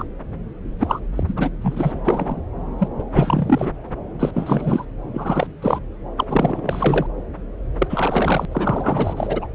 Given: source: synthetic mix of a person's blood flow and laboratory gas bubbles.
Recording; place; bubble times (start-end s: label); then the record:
Doppler ultrasound of blood flow; subclavian vein
0.00-0.04 s: bubbles
0.79-0.99 s: bubbles
1.16-1.23 s: bubbles
1.27-1.33 s: bubbles
1.36-1.50 s: bubbles
1.61-1.92 s: bubbles
2.04-2.42 s: bubbles
2.79-2.88 s: bubbles
2.98-3.04 s: bubbles
3.12-3.70 s: bubbles
4.19-4.85 s: bubbles
5.14-5.47 s: bubbles
5.62-5.79 s: bubbles
6.17-6.25 s: bubbles
6.29-7.06 s: bubbles
7.78-8.46 s: bubbles
8.50-9.47 s: bubbles
From the record:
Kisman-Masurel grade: 342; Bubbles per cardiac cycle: rolling drumbeat, 9 or more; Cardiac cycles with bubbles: 100%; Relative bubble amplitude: moderate (0.250 to 0.450); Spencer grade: 3 (all of the cardiac periods contain showers or single bubble signals, but not dominating or overriding the cardiac motion signals); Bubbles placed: anywhere in the cardiac cycle